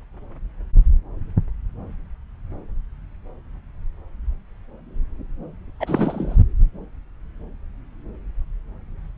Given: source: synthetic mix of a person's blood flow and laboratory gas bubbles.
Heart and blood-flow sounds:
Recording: Doppler ultrasound of blood flow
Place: subclavian vein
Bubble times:
5.79-6.37 s: bubbles
From the record:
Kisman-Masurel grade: 212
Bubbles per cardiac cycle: several, 3 to 8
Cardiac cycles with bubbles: 1 to 10%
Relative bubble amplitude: moderate (0.250 to 0.450)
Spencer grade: 1 (occasional bubble signal discernible with the cardiac motion signal, with majority of cardiac periods free of bubbles)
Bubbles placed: anywhere in the cardiac cycle

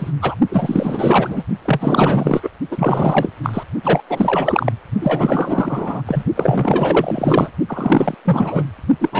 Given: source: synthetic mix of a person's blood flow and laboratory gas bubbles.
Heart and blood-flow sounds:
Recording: Doppler ultrasound of blood flow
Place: precordium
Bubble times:
0.00-0.11 s: bubbles
0.21-0.35 s: bubbles
0.49-1.44 s: bubbles
1.65-2.49 s: bubbles
2.71-3.33 s: bubbles
3.43-3.63 s: bubbles
3.83-4.01 s: bubbles
4.09-4.73 s: bubbles
5.01-6.02 s: bubbles
6.05-6.24 s: bubbles
6.36-7.50 s: bubbles
7.68-8.14 s: bubbles
8.25-8.64 s: bubbles
9.01-9.10 s: bubbles
9.12-9.20 s: bubbles
From the record:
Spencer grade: 4 (maximum detectable bubble signal sounding continuously throughout systole and diastole of every cardiac period, and overriding the amplitude of the normal cardiac signals)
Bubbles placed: only in the low amplitude regions of the cardiac cycle

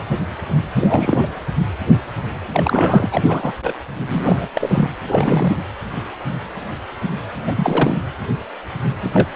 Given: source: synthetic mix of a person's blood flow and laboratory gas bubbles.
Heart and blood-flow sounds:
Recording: Doppler ultrasound of blood flow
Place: precordium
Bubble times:
0.75-1.28 s: bubbles
2.52-3.08 s: bubbles
3.12-3.52 s: bubbles
3.62-3.74 s: bubbles
4.08-4.49 s: bubbles
4.54-4.90 s: bubbles
5.05-5.54 s: bubbles
7.45-7.98 s: bubbles
9.01-9.11 s: bubbles
9.13-9.36 s: bubbles
From the record:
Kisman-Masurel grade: 332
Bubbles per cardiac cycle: rolling drumbeat, 9 or more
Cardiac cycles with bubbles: 50 to 99%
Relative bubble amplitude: moderate (0.250 to 0.450)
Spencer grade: 3 (all of the cardiac periods contain showers or single bubble signals, but not dominating or overriding the cardiac motion signals)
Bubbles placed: anywhere in the cardiac cycle

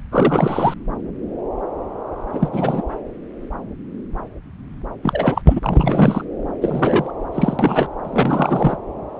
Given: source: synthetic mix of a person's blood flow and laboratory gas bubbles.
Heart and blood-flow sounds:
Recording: Doppler ultrasound of blood flow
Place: subclavian vein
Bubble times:
0.12-0.74 s: bubbles
2.32-2.82 s: bubbles
5.03-5.42 s: bubbles
5.46-5.60 s: bubbles
5.63-6.25 s: bubbles
6.62-7.11 s: bubbles
7.32-7.88 s: bubbles
8.04-8.77 s: bubbles
From the record:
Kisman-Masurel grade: 333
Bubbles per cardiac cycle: rolling drumbeat, 9 or more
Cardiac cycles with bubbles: 50 to 99%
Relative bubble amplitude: loud (0.450 to 0.775)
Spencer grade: 3 (all of the cardiac periods contain showers or single bubble signals, but not dominating or overriding the cardiac motion signals)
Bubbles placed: anywhere in the cardiac cycle

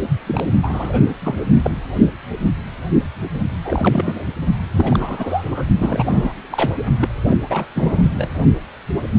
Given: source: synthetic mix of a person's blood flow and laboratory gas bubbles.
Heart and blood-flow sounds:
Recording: Doppler ultrasound of blood flow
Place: precordium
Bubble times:
0.26-0.47 s: bubbles
0.62-1.02 s: bubbles
1.21-1.43 s: bubbles
1.62-1.74 s: bubbles
3.65-4.26 s: bubbles
4.75-5.64 s: bubbles
5.79-6.04 s: bubbles
6.06-6.34 s: bubbles
6.50-6.75 s: bubbles
7.00-7.09 s: bubbles
7.29-7.35 s: bubbles
7.50-7.65 s: bubbles
7.75-8.10 s: bubbles
8.16-8.29 s: bubbles
From the record:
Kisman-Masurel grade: 332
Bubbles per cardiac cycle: rolling drumbeat, 9 or more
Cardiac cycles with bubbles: 50 to 99%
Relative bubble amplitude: moderate (0.250 to 0.450)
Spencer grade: 3 (all of the cardiac periods contain showers or single bubble signals, but not dominating or overriding the cardiac motion signals)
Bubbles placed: only in the low amplitude regions of the cardiac cycle

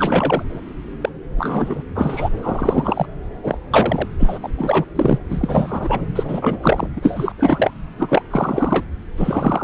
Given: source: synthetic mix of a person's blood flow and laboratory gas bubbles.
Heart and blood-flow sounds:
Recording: Doppler ultrasound of blood flow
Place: subclavian vein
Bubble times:
0.00-0.45 s: bubbles
1.01-1.09 s: bubbles
1.38-1.83 s: bubbles
1.95-2.29 s: bubbles
2.42-3.06 s: bubbles
3.42-3.58 s: bubbles
3.73-4.08 s: bubbles
4.19-4.38 s: bubbles
4.42-4.48 s: bubbles
4.58-4.85 s: bubbles
4.95-5.19 s: bubbles
5.29-6.01 s: bubbles
6.15-6.58 s: bubbles
6.62-6.87 s: bubbles
6.96-7.32 s: bubbles
7.38-7.71 s: bubbles
7.98-8.22 s: bubbles
8.30-8.86 s: bubbles
9.17-9.64 s: bubbles
From the record:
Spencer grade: 3 (all of the cardiac periods contain showers or single bubble signals, but not dominating or overriding the cardiac motion signals)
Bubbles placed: anywhere in the cardiac cycle

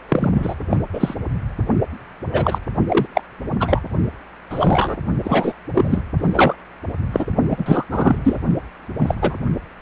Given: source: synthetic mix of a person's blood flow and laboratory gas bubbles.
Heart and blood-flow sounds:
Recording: Doppler ultrasound of blood flow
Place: precordium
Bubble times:
0.09-0.55 s: bubbles
0.70-0.78 s: bubbles
0.93-1.14 s: bubbles
2.32-2.58 s: bubbles
2.88-3.06 s: bubbles
3.15-3.21 s: bubbles
3.60-3.81 s: bubbles
4.50-4.96 s: bubbles
5.23-5.53 s: bubbles
5.75-6.03 s: bubbles
6.18-6.55 s: bubbles
7.12-7.26 s: bubbles
7.50-7.84 s: bubbles
7.91-8.18 s: bubbles
8.24-8.38 s: bubbles
8.99-9.14 s: bubbles
9.21-9.35 s: bubbles
From the record:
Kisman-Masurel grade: 243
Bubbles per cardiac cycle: several, 3 to 8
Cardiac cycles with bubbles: 100%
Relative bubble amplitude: loud (0.450 to 0.775)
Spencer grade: 3 (all of the cardiac periods contain showers or single bubble signals, but not dominating or overriding the cardiac motion signals)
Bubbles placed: only in the low amplitude regions of the cardiac cycle

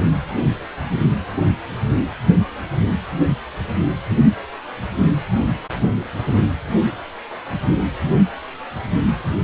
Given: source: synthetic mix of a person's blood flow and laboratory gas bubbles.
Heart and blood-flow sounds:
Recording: Doppler ultrasound of blood flow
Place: precordium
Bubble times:
no bubbles
From the record:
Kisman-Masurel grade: 000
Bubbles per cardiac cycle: 0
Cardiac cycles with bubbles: 0%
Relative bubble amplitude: no bubbles discernible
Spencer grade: 0 (complete lack of bubble signals)

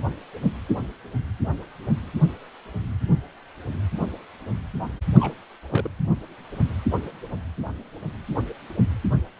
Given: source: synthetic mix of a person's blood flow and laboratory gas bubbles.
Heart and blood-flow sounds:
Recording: Doppler ultrasound of blood flow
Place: precordium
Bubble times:
5.15-5.33 s: bubbles
5.71-5.88 s: bubbles
From the record:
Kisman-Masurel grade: 121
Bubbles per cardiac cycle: 1 to 2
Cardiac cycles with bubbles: 10 to 50%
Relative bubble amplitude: barely perceptible (0.100 to 0.250)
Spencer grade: 2 (many but less than half of the cardiac periods contain bubble signals, singularly or in groups)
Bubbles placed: anywhere in the cardiac cycle

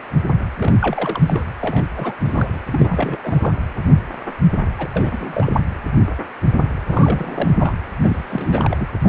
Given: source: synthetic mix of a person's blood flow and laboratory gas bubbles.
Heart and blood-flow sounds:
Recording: Doppler ultrasound of blood flow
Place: precordium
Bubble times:
0.56-0.74 s: bubbles
0.81-1.43 s: bubbles
1.61-1.84 s: bubbles
1.96-2.14 s: bubbles
2.25-2.59 s: bubbles
2.71-3.54 s: bubbles
4.79-4.88 s: bubbles
4.94-5.60 s: bubbles
6.88-7.74 s: bubbles
8.03-8.77 s: bubbles
8.79-8.88 s: bubbles
9.03-9.09 s: bubbles
From the record:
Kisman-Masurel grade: 332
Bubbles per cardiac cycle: rolling drumbeat, 9 or more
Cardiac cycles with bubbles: 50 to 99%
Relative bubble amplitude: moderate (0.250 to 0.450)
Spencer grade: 3 (all of the cardiac periods contain showers or single bubble signals, but not dominating or overriding the cardiac motion signals)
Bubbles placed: anywhere in the cardiac cycle

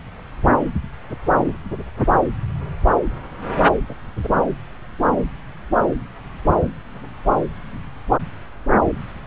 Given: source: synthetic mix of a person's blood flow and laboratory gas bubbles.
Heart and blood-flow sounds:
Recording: Doppler ultrasound of blood flow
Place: subclavian vein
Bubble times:
3.89-3.95 s: bubbles
4.23-4.29 s: bubbles
From the record:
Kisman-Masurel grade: 122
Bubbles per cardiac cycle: 1 to 2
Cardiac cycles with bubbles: 10 to 50%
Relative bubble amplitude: moderate (0.250 to 0.450)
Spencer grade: 2 (many but less than half of the cardiac periods contain bubble signals, singularly or in groups)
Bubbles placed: anywhere in the cardiac cycle

